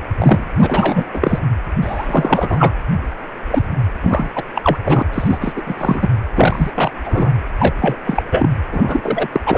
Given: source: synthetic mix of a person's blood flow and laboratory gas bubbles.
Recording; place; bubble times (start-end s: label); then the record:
Doppler ultrasound of blood flow; precordium
0.18-0.44 s: bubbles
0.56-1.09 s: bubbles
1.13-1.40 s: bubbles
1.82-2.74 s: bubbles
3.50-3.63 s: bubbles
4.01-4.30 s: bubbles
4.35-4.43 s: bubbles
4.54-4.77 s: bubbles
4.84-5.02 s: bubbles
5.13-5.38 s: bubbles
5.41-5.62 s: bubbles
5.66-5.74 s: bubbles
5.77-6.08 s: bubbles
6.37-6.71 s: bubbles
6.75-6.92 s: bubbles
7.04-7.30 s: bubbles
7.58-7.72 s: bubbles
7.79-8.22 s: bubbles
8.31-8.49 s: bubbles
8.71-9.28 s: bubbles
9.32-9.40 s: bubbles
9.46-9.58 s: bubbles
From the record:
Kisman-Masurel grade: 343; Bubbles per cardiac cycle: rolling drumbeat, 9 or more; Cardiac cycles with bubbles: 100%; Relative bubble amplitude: loud (0.450 to 0.775); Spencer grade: 3 (all of the cardiac periods contain showers or single bubble signals, but not dominating or overriding the cardiac motion signals); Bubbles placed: anywhere in the cardiac cycle